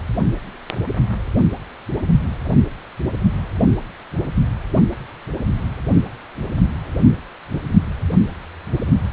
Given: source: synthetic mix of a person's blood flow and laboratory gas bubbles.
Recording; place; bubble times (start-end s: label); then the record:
Doppler ultrasound of blood flow; precordium
no bubbles
From the record:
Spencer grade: 0 (complete lack of bubble signals)